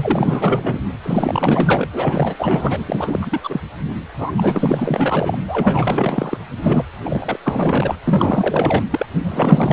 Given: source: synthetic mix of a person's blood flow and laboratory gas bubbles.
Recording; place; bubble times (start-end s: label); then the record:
Doppler ultrasound of blood flow; precordium
0.00-0.79 s: bubbles
1.03-1.87 s: bubbles
1.92-2.35 s: bubbles
2.38-2.85 s: bubbles
2.88-3.60 s: bubbles
4.18-4.32 s: bubbles
4.37-5.38 s: bubbles
5.47-6.38 s: bubbles
6.62-6.82 s: bubbles
7.05-7.39 s: bubbles
7.44-7.96 s: bubbles
8.07-8.83 s: bubbles
8.90-9.06 s: bubbles
9.23-9.73 s: bubbles
From the record:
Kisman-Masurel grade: 444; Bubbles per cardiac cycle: continuous sound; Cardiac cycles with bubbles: 100%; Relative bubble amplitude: maximal (0.775 to 0.999); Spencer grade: 4 (maximum detectable bubble signal sounding continuously throughout systole and diastole of every cardiac period, and overriding the amplitude of the normal cardiac signals); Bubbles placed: anywhere in the cardiac cycle